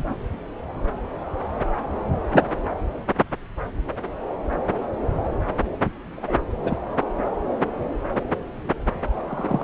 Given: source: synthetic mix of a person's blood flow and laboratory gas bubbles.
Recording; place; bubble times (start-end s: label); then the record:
Doppler ultrasound of blood flow; subclavian vein
0.00-0.15 s: bubbles
2.32-2.46 s: bubbles
6.15-6.38 s: bubbles
6.63-6.78 s: bubbles
9.27-9.64 s: bubbles
From the record:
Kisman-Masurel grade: 122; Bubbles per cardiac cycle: 1 to 2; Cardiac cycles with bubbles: 10 to 50%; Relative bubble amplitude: moderate (0.250 to 0.450); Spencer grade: 2 (many but less than half of the cardiac periods contain bubble signals, singularly or in groups); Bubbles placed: anywhere in the cardiac cycle